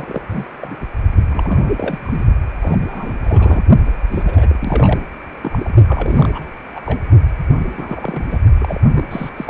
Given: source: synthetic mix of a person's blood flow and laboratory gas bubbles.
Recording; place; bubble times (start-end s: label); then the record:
Doppler ultrasound of blood flow; precordium
0.00-0.22 s: bubbles
0.30-0.44 s: bubbles
0.61-0.76 s: bubbles
1.23-1.72 s: bubbles
1.76-1.99 s: bubbles
2.03-2.25 s: bubbles
2.61-2.78 s: bubbles
2.82-3.62 s: bubbles
4.10-4.23 s: bubbles
4.26-5.00 s: bubbles
5.42-5.73 s: bubbles
5.87-6.46 s: bubbles
6.75-6.80 s: bubbles
6.85-7.00 s: bubbles
7.58-8.38 s: bubbles
8.58-8.80 s: bubbles
8.95-9.29 s: bubbles
9.37-9.50 s: bubbles
From the record:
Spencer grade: 3 (all of the cardiac periods contain showers or single bubble signals, but not dominating or overriding the cardiac motion signals); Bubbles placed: only in the low amplitude regions of the cardiac cycle